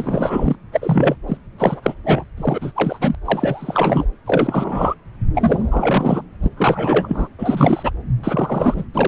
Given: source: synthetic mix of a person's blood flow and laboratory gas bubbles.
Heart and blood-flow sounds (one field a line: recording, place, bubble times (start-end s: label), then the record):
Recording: Doppler ultrasound of blood flow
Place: subclavian vein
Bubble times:
0.00-0.56 s: bubbles
0.72-1.16 s: bubbles
1.27-1.38 s: bubbles
1.58-1.95 s: bubbles
2.05-2.23 s: bubbles
2.37-2.72 s: bubbles
2.75-3.16 s: bubbles
3.24-4.06 s: bubbles
4.26-4.95 s: bubbles
5.35-6.26 s: bubbles
6.42-6.49 s: bubbles
6.57-7.28 s: bubbles
7.38-7.92 s: bubbles
8.23-8.85 s: bubbles
8.94-9.08 s: bubbles
From the record:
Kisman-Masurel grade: 343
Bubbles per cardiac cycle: rolling drumbeat, 9 or more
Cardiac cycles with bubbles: 100%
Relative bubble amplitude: loud (0.450 to 0.775)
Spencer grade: 3 (all of the cardiac periods contain showers or single bubble signals, but not dominating or overriding the cardiac motion signals)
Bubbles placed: anywhere in the cardiac cycle